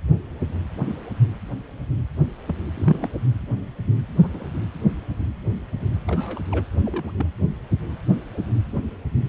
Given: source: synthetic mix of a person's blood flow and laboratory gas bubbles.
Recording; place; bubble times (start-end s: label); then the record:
Doppler ultrasound of blood flow; precordium
2.48-2.55 s: bubbles
2.77-3.08 s: bubbles
4.19-4.29 s: bubbles
4.33-4.45 s: bubbles
6.06-6.40 s: bubbles
6.51-6.65 s: bubbles
6.84-7.11 s: bubbles
7.17-7.26 s: bubbles
From the record:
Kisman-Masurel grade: 121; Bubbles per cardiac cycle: 1 to 2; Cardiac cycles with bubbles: 10 to 50%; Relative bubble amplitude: barely perceptible (0.100 to 0.250); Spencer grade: 2 (many but less than half of the cardiac periods contain bubble signals, singularly or in groups); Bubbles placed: anywhere in the cardiac cycle